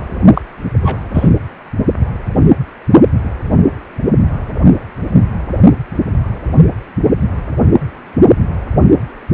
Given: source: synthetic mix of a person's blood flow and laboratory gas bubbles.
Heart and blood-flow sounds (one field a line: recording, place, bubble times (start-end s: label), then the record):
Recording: Doppler ultrasound of blood flow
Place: precordium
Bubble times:
0.34-0.41 s: bubbles
0.82-0.97 s: bubbles
1.14-1.30 s: bubbles
From the record:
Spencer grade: 1 (occasional bubble signal discernible with the cardiac motion signal, with majority of cardiac periods free of bubbles)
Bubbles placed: only in the low amplitude regions of the cardiac cycle